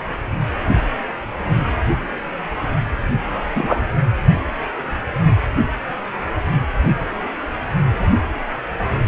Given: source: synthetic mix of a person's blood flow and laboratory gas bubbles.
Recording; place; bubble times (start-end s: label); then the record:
Doppler ultrasound of blood flow; precordium
3.55-3.81 s: bubbles
From the record:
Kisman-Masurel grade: 113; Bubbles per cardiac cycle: 1 to 2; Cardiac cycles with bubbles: 1 to 10%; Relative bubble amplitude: loud (0.450 to 0.775); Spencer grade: 1 (occasional bubble signal discernible with the cardiac motion signal, with majority of cardiac periods free of bubbles); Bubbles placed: anywhere in the cardiac cycle